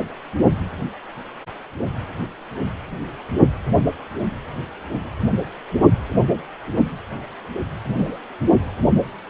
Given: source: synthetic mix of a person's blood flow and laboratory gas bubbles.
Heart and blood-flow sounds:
Doppler ultrasound of blood flow; precordium
7.86-8.18 s: bubbles
From the record:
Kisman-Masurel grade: 112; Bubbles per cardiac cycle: 1 to 2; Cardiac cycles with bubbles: 1 to 10%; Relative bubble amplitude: moderate (0.250 to 0.450); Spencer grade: 1 (occasional bubble signal discernible with the cardiac motion signal, with majority of cardiac periods free of bubbles); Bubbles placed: anywhere in the cardiac cycle

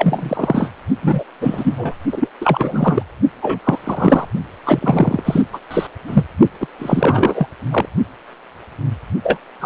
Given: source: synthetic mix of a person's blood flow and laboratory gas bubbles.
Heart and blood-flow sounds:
Doppler ultrasound of blood flow; precordium
0.00-0.70 s: bubbles
1.02-1.23 s: bubbles
1.41-1.95 s: bubbles
2.12-2.29 s: bubbles
2.40-3.02 s: bubbles
3.42-3.59 s: bubbles
3.64-3.78 s: bubbles
3.84-4.25 s: bubbles
4.64-5.42 s: bubbles
5.53-5.60 s: bubbles
5.71-5.87 s: bubbles
6.07-6.25 s: bubbles
6.61-6.67 s: bubbles
6.79-7.47 s: bubbles
7.71-7.86 s: bubbles
9.23-9.38 s: bubbles
9.60-9.65 s: bubbles
From the record:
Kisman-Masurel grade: 333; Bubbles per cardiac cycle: rolling drumbeat, 9 or more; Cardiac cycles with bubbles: 50 to 99%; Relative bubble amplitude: loud (0.450 to 0.775); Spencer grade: 3 (all of the cardiac periods contain showers or single bubble signals, but not dominating or overriding the cardiac motion signals); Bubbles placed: only in the low amplitude regions of the cardiac cycle

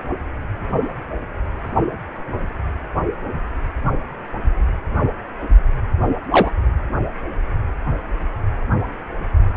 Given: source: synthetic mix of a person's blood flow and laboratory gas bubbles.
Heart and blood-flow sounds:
Doppler ultrasound of blood flow; precordium
6.31-6.50 s: bubbles
From the record:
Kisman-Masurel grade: 113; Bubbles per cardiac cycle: 1 to 2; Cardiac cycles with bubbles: 1 to 10%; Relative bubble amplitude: loud (0.450 to 0.775); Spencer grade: 1 (occasional bubble signal discernible with the cardiac motion signal, with majority of cardiac periods free of bubbles); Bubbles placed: only in the low amplitude regions of the cardiac cycle

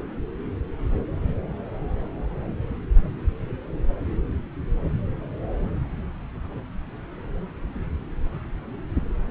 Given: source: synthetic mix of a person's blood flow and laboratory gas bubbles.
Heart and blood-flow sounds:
Doppler ultrasound of blood flow; subclavian vein
no bubbles
From the record:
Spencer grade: 0 (complete lack of bubble signals)

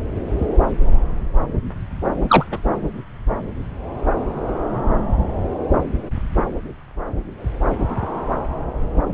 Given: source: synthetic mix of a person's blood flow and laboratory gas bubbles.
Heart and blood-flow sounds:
Doppler ultrasound of blood flow; subclavian vein
2.27-2.45 s: bubbles
2.51-2.59 s: bubbles
From the record:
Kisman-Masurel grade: 113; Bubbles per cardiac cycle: 1 to 2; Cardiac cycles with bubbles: 1 to 10%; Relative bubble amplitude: loud (0.450 to 0.775); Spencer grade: 1 (occasional bubble signal discernible with the cardiac motion signal, with majority of cardiac periods free of bubbles); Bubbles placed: anywhere in the cardiac cycle

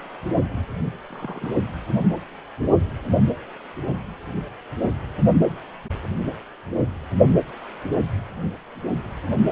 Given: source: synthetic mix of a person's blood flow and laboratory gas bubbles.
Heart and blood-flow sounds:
Doppler ultrasound of blood flow; precordium
1.10-1.58 s: bubbles
From the record:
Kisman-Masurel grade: 211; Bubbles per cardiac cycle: several, 3 to 8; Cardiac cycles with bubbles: 1 to 10%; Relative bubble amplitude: barely perceptible (0.100 to 0.250); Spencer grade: 1 (occasional bubble signal discernible with the cardiac motion signal, with majority of cardiac periods free of bubbles); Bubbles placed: anywhere in the cardiac cycle

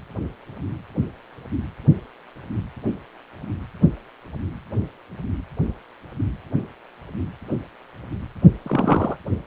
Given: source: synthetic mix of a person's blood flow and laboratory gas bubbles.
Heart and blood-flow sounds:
Doppler ultrasound of blood flow; precordium
8.63-9.17 s: bubbles
From the record:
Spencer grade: 1 (occasional bubble signal discernible with the cardiac motion signal, with majority of cardiac periods free of bubbles); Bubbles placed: anywhere in the cardiac cycle

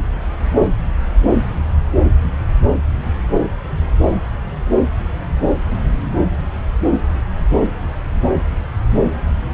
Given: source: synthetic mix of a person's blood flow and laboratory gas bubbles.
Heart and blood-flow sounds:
Doppler ultrasound of blood flow; subclavian vein
no bubbles
From the record:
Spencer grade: 0 (complete lack of bubble signals)

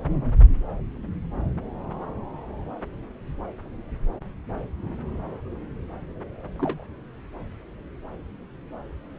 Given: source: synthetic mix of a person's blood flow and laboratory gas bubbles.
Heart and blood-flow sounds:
Doppler ultrasound of blood flow; subclavian vein
6.56-6.84 s: bubbles
From the record:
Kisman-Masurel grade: 111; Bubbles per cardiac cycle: 1 to 2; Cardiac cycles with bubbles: 1 to 10%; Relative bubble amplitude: barely perceptible (0.100 to 0.250); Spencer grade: 1 (occasional bubble signal discernible with the cardiac motion signal, with majority of cardiac periods free of bubbles); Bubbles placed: anywhere in the cardiac cycle

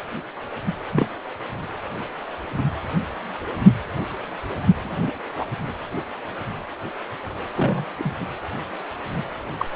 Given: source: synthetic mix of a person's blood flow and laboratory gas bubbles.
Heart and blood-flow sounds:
Doppler ultrasound of blood flow; precordium
0.92-1.07 s: bubbles
4.83-5.12 s: bubbles
5.38-5.46 s: bubbles
7.56-7.85 s: bubbles
7.98-8.13 s: bubbles
9.58-9.66 s: bubbles
From the record:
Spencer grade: 2 (many but less than half of the cardiac periods contain bubble signals, singularly or in groups); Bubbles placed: anywhere in the cardiac cycle

